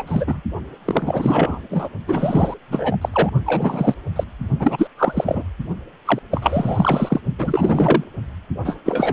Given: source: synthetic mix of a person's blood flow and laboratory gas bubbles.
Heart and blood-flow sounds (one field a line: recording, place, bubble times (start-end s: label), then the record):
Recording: Doppler ultrasound of blood flow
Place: precordium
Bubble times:
0.00-0.03 s: bubbles
0.07-0.40 s: bubbles
0.84-1.60 s: bubbles
1.70-1.89 s: bubbles
2.07-2.54 s: bubbles
2.68-2.97 s: bubbles
3.01-3.09 s: bubbles
3.12-3.29 s: bubbles
3.45-3.96 s: bubbles
4.16-4.23 s: bubbles
4.59-4.88 s: bubbles
4.97-5.43 s: bubbles
6.05-6.19 s: bubbles
6.31-7.21 s: bubbles
7.38-8.04 s: bubbles
8.65-8.76 s: bubbles
8.85-9.13 s: bubbles
From the record:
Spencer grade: 3 (all of the cardiac periods contain showers or single bubble signals, but not dominating or overriding the cardiac motion signals)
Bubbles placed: only in the low amplitude regions of the cardiac cycle